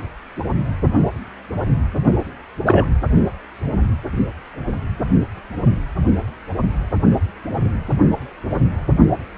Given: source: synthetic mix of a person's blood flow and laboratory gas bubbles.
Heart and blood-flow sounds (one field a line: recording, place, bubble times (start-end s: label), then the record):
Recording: Doppler ultrasound of blood flow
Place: precordium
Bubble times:
2.66-2.87 s: bubbles
From the record:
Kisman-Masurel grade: 113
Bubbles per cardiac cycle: 1 to 2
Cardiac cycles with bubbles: 1 to 10%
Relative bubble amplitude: loud (0.450 to 0.775)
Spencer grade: 1 (occasional bubble signal discernible with the cardiac motion signal, with majority of cardiac periods free of bubbles)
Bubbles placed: only in the low amplitude regions of the cardiac cycle